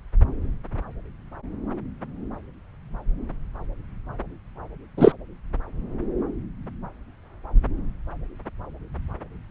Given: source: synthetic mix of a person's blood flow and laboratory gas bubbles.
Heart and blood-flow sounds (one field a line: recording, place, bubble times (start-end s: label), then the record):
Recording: Doppler ultrasound of blood flow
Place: subclavian vein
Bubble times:
4.97-5.12 s: bubbles
From the record:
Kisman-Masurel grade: 113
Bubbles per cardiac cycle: 1 to 2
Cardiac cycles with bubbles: 1 to 10%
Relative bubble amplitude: loud (0.450 to 0.775)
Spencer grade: 1 (occasional bubble signal discernible with the cardiac motion signal, with majority of cardiac periods free of bubbles)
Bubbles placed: anywhere in the cardiac cycle